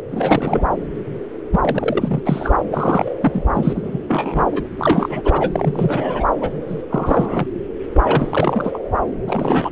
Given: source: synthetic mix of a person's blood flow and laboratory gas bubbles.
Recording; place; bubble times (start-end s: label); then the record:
Doppler ultrasound of blood flow; subclavian vein
0.09-0.66 s: bubbles
1.51-2.21 s: bubbles
2.25-2.54 s: bubbles
2.71-3.14 s: bubbles
3.21-3.44 s: bubbles
3.54-3.98 s: bubbles
4.08-4.46 s: bubbles
4.52-4.69 s: bubbles
4.79-5.22 s: bubbles
5.24-6.25 s: bubbles
6.41-6.50 s: bubbles
6.69-6.82 s: bubbles
6.91-7.47 s: bubbles
7.94-8.78 s: bubbles
9.27-9.70 s: bubbles
From the record:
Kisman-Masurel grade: 342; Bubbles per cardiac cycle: rolling drumbeat, 9 or more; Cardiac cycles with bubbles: 100%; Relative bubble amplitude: moderate (0.250 to 0.450); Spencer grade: 3 (all of the cardiac periods contain showers or single bubble signals, but not dominating or overriding the cardiac motion signals); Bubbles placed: anywhere in the cardiac cycle